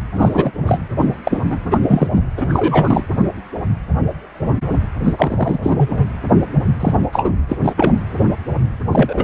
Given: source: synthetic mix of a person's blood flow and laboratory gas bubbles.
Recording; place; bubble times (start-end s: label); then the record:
Doppler ultrasound of blood flow; precordium
0.15-0.51 s: bubbles
0.66-0.80 s: bubbles
0.98-1.18 s: bubbles
1.24-1.38 s: bubbles
1.50-1.58 s: bubbles
1.70-1.79 s: bubbles
1.82-2.08 s: bubbles
2.13-2.22 s: bubbles
2.37-3.04 s: bubbles
5.04-5.13 s: bubbles
5.17-5.58 s: bubbles
5.62-6.07 s: bubbles
6.79-7.07 s: bubbles
7.12-7.32 s: bubbles
7.48-7.56 s: bubbles
7.63-7.73 s: bubbles
7.75-7.98 s: bubbles
8.91-9.24 s: bubbles
From the record:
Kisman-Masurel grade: 233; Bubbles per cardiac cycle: several, 3 to 8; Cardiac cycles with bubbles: 50 to 99%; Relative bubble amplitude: loud (0.450 to 0.775); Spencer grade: 3 (all of the cardiac periods contain showers or single bubble signals, but not dominating or overriding the cardiac motion signals); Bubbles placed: anywhere in the cardiac cycle